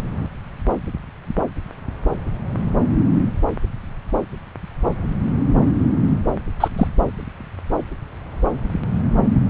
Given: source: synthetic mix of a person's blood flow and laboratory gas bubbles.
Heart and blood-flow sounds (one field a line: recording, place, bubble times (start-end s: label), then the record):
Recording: Doppler ultrasound of blood flow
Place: subclavian vein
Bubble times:
6.60-6.68 s: bubbles
6.78-6.87 s: bubbles
From the record:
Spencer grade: 1 (occasional bubble signal discernible with the cardiac motion signal, with majority of cardiac periods free of bubbles)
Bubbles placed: anywhere in the cardiac cycle